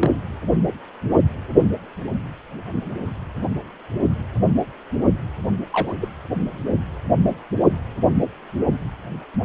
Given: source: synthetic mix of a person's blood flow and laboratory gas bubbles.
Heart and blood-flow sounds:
Doppler ultrasound of blood flow; precordium
0.00-0.11 s: bubbles
5.72-5.94 s: bubbles
6.00-6.09 s: bubbles
From the record:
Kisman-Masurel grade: 122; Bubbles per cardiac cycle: 1 to 2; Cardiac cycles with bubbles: 10 to 50%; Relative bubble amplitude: moderate (0.250 to 0.450); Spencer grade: 2 (many but less than half of the cardiac periods contain bubble signals, singularly or in groups); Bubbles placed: only in the low amplitude regions of the cardiac cycle

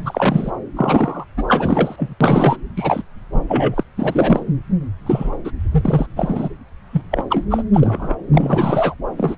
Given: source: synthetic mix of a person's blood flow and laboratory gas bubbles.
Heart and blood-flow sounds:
Doppler ultrasound of blood flow; subclavian vein
0.00-0.52 s: bubbles
0.76-1.25 s: bubbles
1.36-1.44 s: bubbles
1.48-2.15 s: bubbles
2.21-2.56 s: bubbles
2.77-3.02 s: bubbles
3.33-3.83 s: bubbles
3.97-4.43 s: bubbles
5.06-5.30 s: bubbles
5.44-5.51 s: bubbles
5.71-6.06 s: bubbles
6.16-6.49 s: bubbles
6.92-7.01 s: bubbles
7.11-7.24 s: bubbles
7.30-7.46 s: bubbles
7.50-7.62 s: bubbles
7.73-8.15 s: bubbles
8.31-8.95 s: bubbles
9.17-9.37 s: bubbles
From the record:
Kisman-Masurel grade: 243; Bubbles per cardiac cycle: several, 3 to 8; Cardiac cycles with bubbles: 100%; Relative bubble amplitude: loud (0.450 to 0.775); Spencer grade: 3 (all of the cardiac periods contain showers or single bubble signals, but not dominating or overriding the cardiac motion signals); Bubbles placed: anywhere in the cardiac cycle

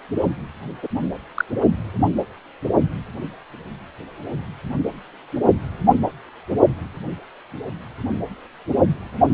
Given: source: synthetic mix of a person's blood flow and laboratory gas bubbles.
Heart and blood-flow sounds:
Doppler ultrasound of blood flow; precordium
0.82-0.88 s: bubbles
1.34-1.45 s: bubbles
From the record:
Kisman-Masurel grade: 112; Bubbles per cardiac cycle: 1 to 2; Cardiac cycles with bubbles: 1 to 10%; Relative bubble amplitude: moderate (0.250 to 0.450); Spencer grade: 1 (occasional bubble signal discernible with the cardiac motion signal, with majority of cardiac periods free of bubbles); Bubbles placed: only in the low amplitude regions of the cardiac cycle

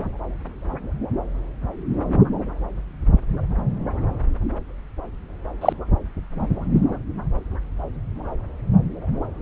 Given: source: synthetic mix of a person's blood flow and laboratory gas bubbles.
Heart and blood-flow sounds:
Doppler ultrasound of blood flow; subclavian vein
5.61-5.72 s: bubbles
From the record:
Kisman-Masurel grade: 123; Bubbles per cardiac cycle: 1 to 2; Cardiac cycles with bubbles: 10 to 50%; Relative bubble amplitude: loud (0.450 to 0.775); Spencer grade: 2 (many but less than half of the cardiac periods contain bubble signals, singularly or in groups); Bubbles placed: anywhere in the cardiac cycle

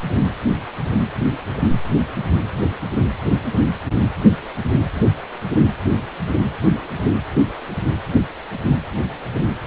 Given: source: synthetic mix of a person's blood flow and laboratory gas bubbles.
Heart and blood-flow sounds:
Doppler ultrasound of blood flow; precordium
no bubbles
From the record:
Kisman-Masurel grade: 000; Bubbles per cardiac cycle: 0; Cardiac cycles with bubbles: 0%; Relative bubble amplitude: no bubbles discernible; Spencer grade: 0 (complete lack of bubble signals)

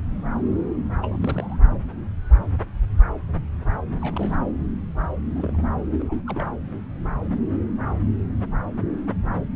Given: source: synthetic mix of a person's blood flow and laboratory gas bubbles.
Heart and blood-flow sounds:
Doppler ultrasound of blood flow; subclavian vein
1.02-1.18 s: bubbles
1.21-1.57 s: bubbles
3.99-4.38 s: bubbles
5.36-5.62 s: bubbles
5.99-6.03 s: bubbles
6.06-6.14 s: bubbles
6.17-6.21 s: bubbles
6.25-6.44 s: bubbles
From the record:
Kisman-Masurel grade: 221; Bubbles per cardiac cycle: several, 3 to 8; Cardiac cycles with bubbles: 10 to 50%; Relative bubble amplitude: barely perceptible (0.100 to 0.250); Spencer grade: 2 (many but less than half of the cardiac periods contain bubble signals, singularly or in groups); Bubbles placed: anywhere in the cardiac cycle

